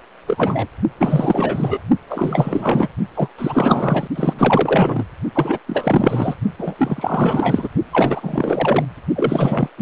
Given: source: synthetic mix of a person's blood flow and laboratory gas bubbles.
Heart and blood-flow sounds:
Doppler ultrasound of blood flow; precordium
0.27-0.67 s: bubbles
0.99-1.80 s: bubbles
2.10-2.88 s: bubbles
3.15-3.28 s: bubbles
3.38-4.08 s: bubbles
4.15-5.04 s: bubbles
5.35-5.59 s: bubbles
5.67-6.35 s: bubbles
6.58-6.75 s: bubbles
6.78-7.69 s: bubbles
7.92-8.85 s: bubbles
9.16-9.69 s: bubbles
9.78-9.82 s: bubbles
From the record:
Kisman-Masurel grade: 444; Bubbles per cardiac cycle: continuous sound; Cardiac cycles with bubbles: 100%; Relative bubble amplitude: maximal (0.775 to 0.999); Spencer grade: 4 (maximum detectable bubble signal sounding continuously throughout systole and diastole of every cardiac period, and overriding the amplitude of the normal cardiac signals); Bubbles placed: only in the low amplitude regions of the cardiac cycle

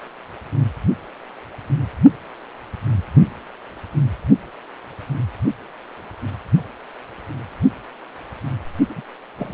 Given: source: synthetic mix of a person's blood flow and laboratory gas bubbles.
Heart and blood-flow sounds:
Doppler ultrasound of blood flow; precordium
8.89-9.02 s: bubbles
9.38-9.54 s: bubbles
From the record:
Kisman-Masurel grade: 211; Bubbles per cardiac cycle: several, 3 to 8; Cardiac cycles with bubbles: 1 to 10%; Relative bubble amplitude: barely perceptible (0.100 to 0.250); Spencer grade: 1 (occasional bubble signal discernible with the cardiac motion signal, with majority of cardiac periods free of bubbles); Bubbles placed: only in the low amplitude regions of the cardiac cycle

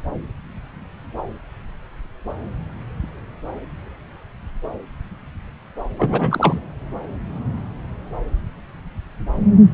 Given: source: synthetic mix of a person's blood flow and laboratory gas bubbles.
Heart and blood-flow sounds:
Doppler ultrasound of blood flow; subclavian vein
5.98-6.58 s: bubbles
From the record:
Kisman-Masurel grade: 213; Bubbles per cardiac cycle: several, 3 to 8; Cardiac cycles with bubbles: 1 to 10%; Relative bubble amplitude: loud (0.450 to 0.775); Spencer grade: 1 (occasional bubble signal discernible with the cardiac motion signal, with majority of cardiac periods free of bubbles); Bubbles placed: anywhere in the cardiac cycle

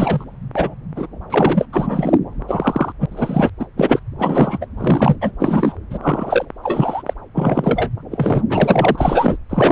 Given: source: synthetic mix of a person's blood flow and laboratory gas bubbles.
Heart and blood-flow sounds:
Doppler ultrasound of blood flow; subclavian vein
0.00-0.24 s: bubbles
0.54-0.74 s: bubbles
0.95-1.06 s: bubbles
1.30-1.66 s: bubbles
1.72-2.18 s: bubbles
2.48-2.93 s: bubbles
3.01-3.06 s: bubbles
3.11-3.50 s: bubbles
3.60-3.66 s: bubbles
3.77-4.00 s: bubbles
4.19-4.66 s: bubbles
4.77-5.17 s: bubbles
5.21-5.32 s: bubbles
5.39-5.75 s: bubbles
5.90-5.99 s: bubbles
6.02-6.46 s: bubbles
6.63-7.03 s: bubbles
7.06-7.13 s: bubbles
7.34-7.90 s: bubbles
8.10-8.42 s: bubbles
8.49-9.37 s: bubbles
9.49-9.72 s: bubbles
From the record:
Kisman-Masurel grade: 243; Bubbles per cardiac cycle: several, 3 to 8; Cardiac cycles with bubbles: 100%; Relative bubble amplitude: loud (0.450 to 0.775); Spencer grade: 3 (all of the cardiac periods contain showers or single bubble signals, but not dominating or overriding the cardiac motion signals); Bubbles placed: anywhere in the cardiac cycle

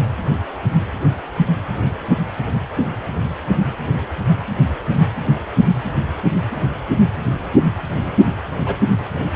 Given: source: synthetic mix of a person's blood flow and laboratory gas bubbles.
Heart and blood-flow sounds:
Doppler ultrasound of blood flow; precordium
8.65-8.75 s: bubbles
From the record:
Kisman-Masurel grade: 112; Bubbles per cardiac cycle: 1 to 2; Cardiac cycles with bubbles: 1 to 10%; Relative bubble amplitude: moderate (0.250 to 0.450); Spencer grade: 1 (occasional bubble signal discernible with the cardiac motion signal, with majority of cardiac periods free of bubbles); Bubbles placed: anywhere in the cardiac cycle

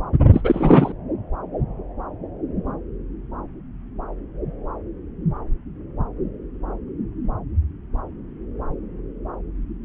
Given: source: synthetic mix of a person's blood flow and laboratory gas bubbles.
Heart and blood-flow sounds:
Doppler ultrasound of blood flow; subclavian vein
0.33-0.92 s: bubbles
From the record:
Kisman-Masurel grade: 213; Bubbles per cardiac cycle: several, 3 to 8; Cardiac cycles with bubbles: 1 to 10%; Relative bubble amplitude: loud (0.450 to 0.775); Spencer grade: 1 (occasional bubble signal discernible with the cardiac motion signal, with majority of cardiac periods free of bubbles); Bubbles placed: anywhere in the cardiac cycle

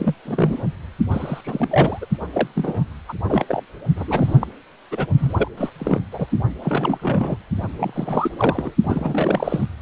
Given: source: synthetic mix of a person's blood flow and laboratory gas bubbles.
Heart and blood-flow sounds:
Doppler ultrasound of blood flow; precordium
0.00-0.14 s: bubbles
0.25-0.63 s: bubbles
1.11-1.99 s: bubbles
2.01-2.05 s: bubbles
2.33-2.48 s: bubbles
2.56-2.84 s: bubbles
3.09-3.13 s: bubbles
3.24-3.45 s: bubbles
3.48-3.62 s: bubbles
3.96-4.04 s: bubbles
4.08-4.38 s: bubbles
4.40-4.47 s: bubbles
4.91-5.06 s: bubbles
5.17-5.33 s: bubbles
5.37-5.48 s: bubbles
5.57-5.69 s: bubbles
5.79-5.99 s: bubbles
6.11-6.26 s: bubbles
6.62-7.37 s: bubbles
7.79-8.74 s: bubbles
8.83-9.66 s: bubbles
From the record:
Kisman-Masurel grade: 342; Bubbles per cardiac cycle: rolling drumbeat, 9 or more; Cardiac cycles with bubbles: 100%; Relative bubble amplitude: moderate (0.250 to 0.450); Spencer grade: 3 (all of the cardiac periods contain showers or single bubble signals, but not dominating or overriding the cardiac motion signals); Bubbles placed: only in the low amplitude regions of the cardiac cycle

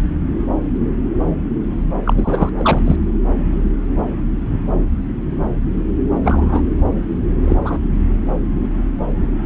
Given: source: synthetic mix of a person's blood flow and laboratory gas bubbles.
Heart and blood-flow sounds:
Doppler ultrasound of blood flow; subclavian vein
2.04-2.13 s: bubbles
2.17-2.49 s: bubbles
2.57-2.83 s: bubbles
2.86-2.96 s: bubbles
6.23-6.62 s: bubbles
7.42-7.56 s: bubbles
7.64-7.79 s: bubbles
From the record:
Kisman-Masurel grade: 223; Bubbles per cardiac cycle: several, 3 to 8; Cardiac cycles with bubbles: 10 to 50%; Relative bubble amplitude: loud (0.450 to 0.775); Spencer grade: 2 (many but less than half of the cardiac periods contain bubble signals, singularly or in groups); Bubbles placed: anywhere in the cardiac cycle

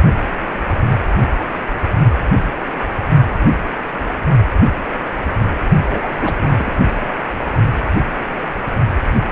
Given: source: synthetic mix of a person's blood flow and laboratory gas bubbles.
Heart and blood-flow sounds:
Doppler ultrasound of blood flow; precordium
5.82-6.35 s: bubbles
6.39-6.76 s: bubbles
7.00-7.17 s: bubbles
From the record:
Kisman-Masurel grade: 222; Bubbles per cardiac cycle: several, 3 to 8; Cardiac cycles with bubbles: 10 to 50%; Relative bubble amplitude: moderate (0.250 to 0.450); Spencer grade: 2 (many but less than half of the cardiac periods contain bubble signals, singularly or in groups); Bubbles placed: only in the low amplitude regions of the cardiac cycle

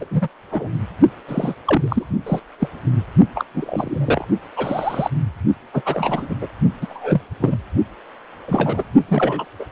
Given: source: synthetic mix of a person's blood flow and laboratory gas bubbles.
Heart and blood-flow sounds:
Doppler ultrasound of blood flow; precordium
0.00-0.05 s: bubbles
0.11-0.28 s: bubbles
0.51-0.79 s: bubbles
1.28-1.54 s: bubbles
1.65-2.06 s: bubbles
2.26-2.40 s: bubbles
2.60-2.69 s: bubbles
3.35-3.45 s: bubbles
3.54-4.25 s: bubbles
4.56-5.10 s: bubbles
5.73-5.82 s: bubbles
5.85-6.35 s: bubbles
6.41-6.47 s: bubbles
6.81-7.21 s: bubbles
7.40-7.57 s: bubbles
8.47-8.84 s: bubbles
9.08-9.45 s: bubbles
9.60-9.65 s: bubbles
From the record:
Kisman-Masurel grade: 242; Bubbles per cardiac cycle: several, 3 to 8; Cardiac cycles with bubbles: 100%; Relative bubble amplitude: moderate (0.250 to 0.450); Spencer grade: 3 (all of the cardiac periods contain showers or single bubble signals, but not dominating or overriding the cardiac motion signals); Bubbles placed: only in the low amplitude regions of the cardiac cycle

